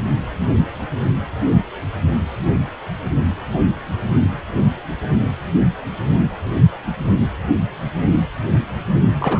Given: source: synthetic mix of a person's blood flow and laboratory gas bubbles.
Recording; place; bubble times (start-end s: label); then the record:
Doppler ultrasound of blood flow; precordium
9.20-9.40 s: bubbles
From the record:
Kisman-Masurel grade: 212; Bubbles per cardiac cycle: several, 3 to 8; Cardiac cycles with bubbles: 1 to 10%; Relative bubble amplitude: moderate (0.250 to 0.450); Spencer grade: 1 (occasional bubble signal discernible with the cardiac motion signal, with majority of cardiac periods free of bubbles); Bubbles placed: only in the low amplitude regions of the cardiac cycle